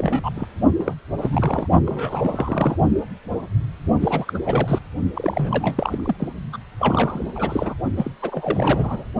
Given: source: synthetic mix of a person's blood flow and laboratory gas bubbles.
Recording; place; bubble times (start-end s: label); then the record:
Doppler ultrasound of blood flow; precordium
0.00-0.30 s: bubbles
0.35-0.47 s: bubbles
0.79-0.94 s: bubbles
1.22-1.68 s: bubbles
1.86-2.77 s: bubbles
4.00-4.38 s: bubbles
4.46-4.79 s: bubbles
5.14-6.32 s: bubbles
6.53-6.57 s: bubbles
6.79-7.32 s: bubbles
7.36-7.74 s: bubbles
7.96-8.11 s: bubbles
8.22-9.04 s: bubbles
From the record:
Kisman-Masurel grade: 332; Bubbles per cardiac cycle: rolling drumbeat, 9 or more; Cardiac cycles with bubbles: 50 to 99%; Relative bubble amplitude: moderate (0.250 to 0.450); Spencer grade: 3 (all of the cardiac periods contain showers or single bubble signals, but not dominating or overriding the cardiac motion signals); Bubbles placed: only in the low amplitude regions of the cardiac cycle